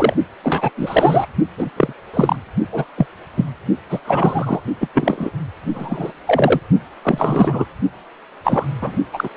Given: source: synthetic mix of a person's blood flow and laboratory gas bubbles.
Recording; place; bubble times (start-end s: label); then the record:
Doppler ultrasound of blood flow; precordium
0.00-0.16 s: bubbles
0.43-0.71 s: bubbles
0.77-1.26 s: bubbles
1.57-1.70 s: bubbles
1.76-1.93 s: bubbles
2.13-2.36 s: bubbles
2.71-2.85 s: bubbles
2.97-3.06 s: bubbles
3.36-3.45 s: bubbles
3.90-4.00 s: bubbles
4.04-4.60 s: bubbles
4.80-4.88 s: bubbles
4.94-5.30 s: bubbles
5.74-6.12 s: bubbles
6.27-6.60 s: bubbles
7.01-7.65 s: bubbles
8.44-8.66 s: bubbles
8.81-8.96 s: bubbles
9.13-9.29 s: bubbles
From the record:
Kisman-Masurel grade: 243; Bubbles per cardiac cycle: several, 3 to 8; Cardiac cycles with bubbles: 100%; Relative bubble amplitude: loud (0.450 to 0.775); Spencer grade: 3 (all of the cardiac periods contain showers or single bubble signals, but not dominating or overriding the cardiac motion signals); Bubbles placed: only in the low amplitude regions of the cardiac cycle